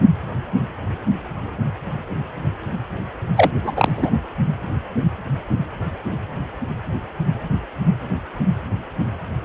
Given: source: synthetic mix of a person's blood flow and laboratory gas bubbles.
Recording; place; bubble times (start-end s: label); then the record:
Doppler ultrasound of blood flow; precordium
3.37-3.51 s: bubbles
3.64-3.92 s: bubbles
3.96-4.11 s: bubbles
From the record:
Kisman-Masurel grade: 213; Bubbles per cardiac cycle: several, 3 to 8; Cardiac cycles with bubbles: 1 to 10%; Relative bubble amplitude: loud (0.450 to 0.775); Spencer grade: 1 (occasional bubble signal discernible with the cardiac motion signal, with majority of cardiac periods free of bubbles); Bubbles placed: anywhere in the cardiac cycle